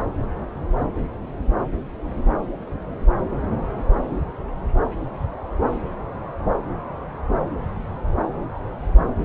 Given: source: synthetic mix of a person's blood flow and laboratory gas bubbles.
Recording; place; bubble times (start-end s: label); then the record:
Doppler ultrasound of blood flow; subclavian vein
no bubbles
From the record:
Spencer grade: 0 (complete lack of bubble signals)